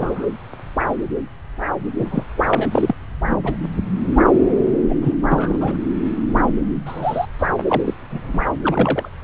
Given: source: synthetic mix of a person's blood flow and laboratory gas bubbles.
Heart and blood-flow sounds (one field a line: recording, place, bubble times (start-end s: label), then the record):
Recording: Doppler ultrasound of blood flow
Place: subclavian vein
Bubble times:
0.00-0.26 s: bubbles
1.98-2.24 s: bubbles
2.49-2.95 s: bubbles
3.29-3.39 s: bubbles
3.43-3.57 s: bubbles
4.88-4.95 s: bubbles
5.01-5.14 s: bubbles
5.29-5.59 s: bubbles
5.61-5.79 s: bubbles
6.56-6.62 s: bubbles
6.86-7.27 s: bubbles
7.38-7.47 s: bubbles
7.57-7.63 s: bubbles
7.67-7.94 s: bubbles
8.11-8.45 s: bubbles
8.62-9.08 s: bubbles
From the record:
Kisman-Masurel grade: 232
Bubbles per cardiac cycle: several, 3 to 8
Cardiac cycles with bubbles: 50 to 99%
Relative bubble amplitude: moderate (0.250 to 0.450)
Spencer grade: 3 (all of the cardiac periods contain showers or single bubble signals, but not dominating or overriding the cardiac motion signals)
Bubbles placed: anywhere in the cardiac cycle